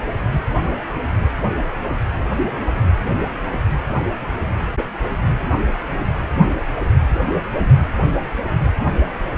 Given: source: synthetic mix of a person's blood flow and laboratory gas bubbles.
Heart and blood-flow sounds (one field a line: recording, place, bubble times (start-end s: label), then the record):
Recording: Doppler ultrasound of blood flow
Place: precordium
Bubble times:
1.57-1.65 s: bubbles
From the record:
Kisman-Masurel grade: 111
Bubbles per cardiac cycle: 1 to 2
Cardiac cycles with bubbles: 1 to 10%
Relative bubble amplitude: barely perceptible (0.100 to 0.250)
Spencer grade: 1 (occasional bubble signal discernible with the cardiac motion signal, with majority of cardiac periods free of bubbles)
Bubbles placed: anywhere in the cardiac cycle